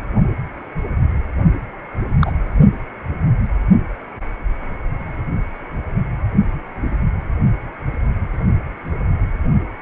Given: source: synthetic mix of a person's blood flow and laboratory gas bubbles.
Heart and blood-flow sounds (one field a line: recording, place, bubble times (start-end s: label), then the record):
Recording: Doppler ultrasound of blood flow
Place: precordium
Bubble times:
2.19-2.31 s: bubbles
From the record:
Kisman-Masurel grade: 112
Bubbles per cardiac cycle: 1 to 2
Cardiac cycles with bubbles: 1 to 10%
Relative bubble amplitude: moderate (0.250 to 0.450)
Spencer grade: 1 (occasional bubble signal discernible with the cardiac motion signal, with majority of cardiac periods free of bubbles)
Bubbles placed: only in the low amplitude regions of the cardiac cycle